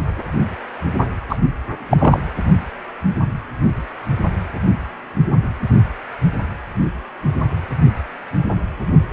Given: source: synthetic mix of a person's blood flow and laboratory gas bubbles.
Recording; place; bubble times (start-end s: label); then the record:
Doppler ultrasound of blood flow; precordium
1.30-1.37 s: bubbles
1.90-2.20 s: bubbles
From the record:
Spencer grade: 1 (occasional bubble signal discernible with the cardiac motion signal, with majority of cardiac periods free of bubbles); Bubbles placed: anywhere in the cardiac cycle